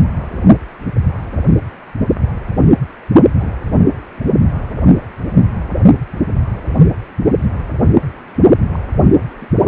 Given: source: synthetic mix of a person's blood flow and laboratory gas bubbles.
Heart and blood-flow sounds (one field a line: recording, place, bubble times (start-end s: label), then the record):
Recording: Doppler ultrasound of blood flow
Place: precordium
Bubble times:
3.40-3.49 s: bubbles
8.73-8.79 s: bubbles
9.40-9.46 s: bubbles
From the record:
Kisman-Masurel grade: 121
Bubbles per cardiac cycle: 1 to 2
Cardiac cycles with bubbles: 10 to 50%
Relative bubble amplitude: barely perceptible (0.100 to 0.250)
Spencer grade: 2 (many but less than half of the cardiac periods contain bubble signals, singularly or in groups)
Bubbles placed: only in the low amplitude regions of the cardiac cycle